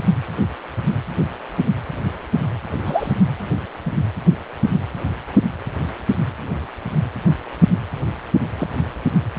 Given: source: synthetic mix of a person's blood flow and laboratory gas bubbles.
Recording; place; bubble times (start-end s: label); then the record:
Doppler ultrasound of blood flow; precordium
2.86-3.12 s: bubbles
8.58-8.67 s: bubbles
From the record:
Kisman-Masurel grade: 122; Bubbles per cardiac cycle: 1 to 2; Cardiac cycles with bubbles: 10 to 50%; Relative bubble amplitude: moderate (0.250 to 0.450); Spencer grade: 2 (many but less than half of the cardiac periods contain bubble signals, singularly or in groups); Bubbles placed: anywhere in the cardiac cycle